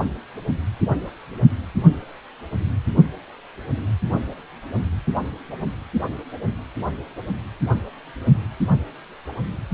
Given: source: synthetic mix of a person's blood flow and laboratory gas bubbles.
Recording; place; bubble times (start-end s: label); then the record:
Doppler ultrasound of blood flow; precordium
0.00-0.05 s: bubbles
From the record:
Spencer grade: 1 (occasional bubble signal discernible with the cardiac motion signal, with majority of cardiac periods free of bubbles); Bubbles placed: only in the low amplitude regions of the cardiac cycle